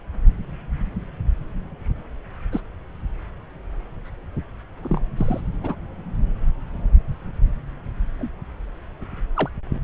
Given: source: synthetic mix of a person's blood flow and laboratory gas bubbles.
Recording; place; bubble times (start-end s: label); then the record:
Doppler ultrasound of blood flow; subclavian vein
2.52-2.60 s: bubbles
4.83-5.00 s: bubbles
5.17-5.41 s: bubbles
5.62-5.76 s: bubbles
8.19-8.30 s: bubbles
9.35-9.50 s: bubbles
From the record:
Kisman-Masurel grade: 122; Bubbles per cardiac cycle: 1 to 2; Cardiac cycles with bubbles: 10 to 50%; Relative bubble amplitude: moderate (0.250 to 0.450); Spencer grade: 2 (many but less than half of the cardiac periods contain bubble signals, singularly or in groups); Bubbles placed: anywhere in the cardiac cycle